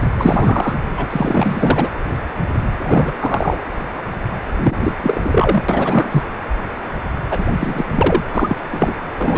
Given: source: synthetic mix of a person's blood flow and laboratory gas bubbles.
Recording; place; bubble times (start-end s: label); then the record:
Doppler ultrasound of blood flow; precordium
0.18-0.77 s: bubbles
0.97-1.06 s: bubbles
1.10-1.91 s: bubbles
2.77-3.12 s: bubbles
3.19-3.58 s: bubbles
4.63-4.76 s: bubbles
4.83-4.93 s: bubbles
5.00-6.23 s: bubbles
7.30-7.45 s: bubbles
7.59-7.85 s: bubbles
7.90-8.23 s: bubbles
8.30-8.56 s: bubbles
8.63-8.96 s: bubbles
9.16-9.38 s: bubbles
From the record:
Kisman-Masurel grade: 333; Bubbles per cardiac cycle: rolling drumbeat, 9 or more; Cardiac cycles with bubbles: 50 to 99%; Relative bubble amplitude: loud (0.450 to 0.775); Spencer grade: 3 (all of the cardiac periods contain showers or single bubble signals, but not dominating or overriding the cardiac motion signals); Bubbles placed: anywhere in the cardiac cycle